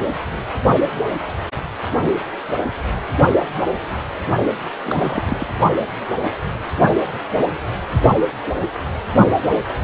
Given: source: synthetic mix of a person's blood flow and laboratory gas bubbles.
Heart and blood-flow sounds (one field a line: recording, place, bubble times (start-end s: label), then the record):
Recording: Doppler ultrasound of blood flow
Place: precordium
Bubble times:
4.83-5.23 s: bubbles
5.26-5.36 s: bubbles
5.39-5.46 s: bubbles
From the record:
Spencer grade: 1 (occasional bubble signal discernible with the cardiac motion signal, with majority of cardiac periods free of bubbles)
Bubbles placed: only in the low amplitude regions of the cardiac cycle